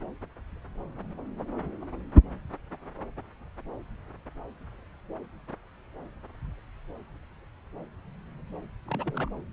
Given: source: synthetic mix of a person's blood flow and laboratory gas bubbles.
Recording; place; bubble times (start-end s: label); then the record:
Doppler ultrasound of blood flow; subclavian vein
8.86-9.28 s: bubbles
From the record:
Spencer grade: 2 (many but less than half of the cardiac periods contain bubble signals, singularly or in groups); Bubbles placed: anywhere in the cardiac cycle